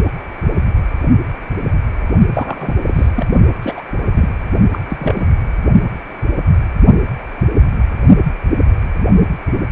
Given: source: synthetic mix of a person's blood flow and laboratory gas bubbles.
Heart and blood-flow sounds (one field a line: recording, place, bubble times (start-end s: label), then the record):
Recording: Doppler ultrasound of blood flow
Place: precordium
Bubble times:
2.34-2.74 s: bubbles
2.88-3.11 s: bubbles
3.16-3.25 s: bubbles
3.62-3.81 s: bubbles
4.14-4.29 s: bubbles
4.72-4.79 s: bubbles
4.89-5.26 s: bubbles
From the record:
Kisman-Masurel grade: 222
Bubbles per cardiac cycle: several, 3 to 8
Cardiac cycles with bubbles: 10 to 50%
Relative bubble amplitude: moderate (0.250 to 0.450)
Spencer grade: 2 (many but less than half of the cardiac periods contain bubble signals, singularly or in groups)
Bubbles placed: only in the low amplitude regions of the cardiac cycle